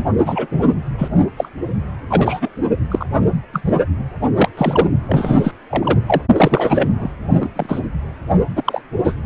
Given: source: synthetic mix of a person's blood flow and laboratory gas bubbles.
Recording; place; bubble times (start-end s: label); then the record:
Doppler ultrasound of blood flow; precordium
0.00-0.04 s: bubbles
0.25-0.47 s: bubbles
0.51-0.62 s: bubbles
0.98-1.08 s: bubbles
1.36-1.48 s: bubbles
2.10-2.49 s: bubbles
2.91-3.05 s: bubbles
3.53-3.61 s: bubbles
4.36-4.49 s: bubbles
4.57-4.87 s: bubbles
5.08-5.52 s: bubbles
5.70-5.98 s: bubbles
6.06-6.21 s: bubbles
6.37-7.16 s: bubbles
7.40-7.49 s: bubbles
7.56-7.80 s: bubbles
8.55-8.81 s: bubbles
9.04-9.15 s: bubbles
From the record:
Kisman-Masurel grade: 233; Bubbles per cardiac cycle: several, 3 to 8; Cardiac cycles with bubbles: 50 to 99%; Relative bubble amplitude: loud (0.450 to 0.775); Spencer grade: 3 (all of the cardiac periods contain showers or single bubble signals, but not dominating or overriding the cardiac motion signals); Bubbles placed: only in the low amplitude regions of the cardiac cycle